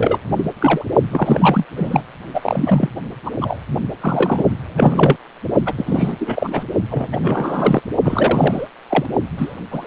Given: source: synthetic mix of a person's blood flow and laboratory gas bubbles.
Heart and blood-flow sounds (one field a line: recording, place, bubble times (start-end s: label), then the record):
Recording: Doppler ultrasound of blood flow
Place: precordium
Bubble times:
0.00-0.18 s: bubbles
0.37-0.45 s: bubbles
0.60-0.84 s: bubbles
1.11-1.65 s: bubbles
1.76-2.03 s: bubbles
2.33-2.90 s: bubbles
3.24-3.31 s: bubbles
3.41-3.60 s: bubbles
4.00-4.43 s: bubbles
4.69-5.16 s: bubbles
5.65-5.73 s: bubbles
5.77-6.64 s: bubbles
6.90-7.07 s: bubbles
7.12-7.17 s: bubbles
7.22-7.82 s: bubbles
8.04-8.68 s: bubbles
8.89-9.05 s: bubbles
9.37-9.55 s: bubbles
9.71-9.87 s: bubbles
From the record:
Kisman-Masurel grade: 343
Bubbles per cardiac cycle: rolling drumbeat, 9 or more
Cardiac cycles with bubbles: 100%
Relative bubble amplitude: loud (0.450 to 0.775)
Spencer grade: 3 (all of the cardiac periods contain showers or single bubble signals, but not dominating or overriding the cardiac motion signals)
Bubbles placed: only in the low amplitude regions of the cardiac cycle